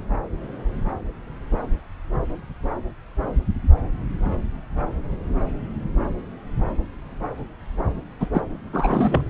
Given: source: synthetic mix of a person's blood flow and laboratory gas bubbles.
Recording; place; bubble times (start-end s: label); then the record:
Doppler ultrasound of blood flow; subclavian vein
8.20-8.27 s: bubbles
8.33-8.41 s: bubbles
8.73-9.23 s: bubbles
From the record:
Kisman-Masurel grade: 213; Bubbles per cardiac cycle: several, 3 to 8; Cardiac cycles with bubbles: 1 to 10%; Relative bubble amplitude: loud (0.450 to 0.775); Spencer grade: 1 (occasional bubble signal discernible with the cardiac motion signal, with majority of cardiac periods free of bubbles); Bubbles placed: anywhere in the cardiac cycle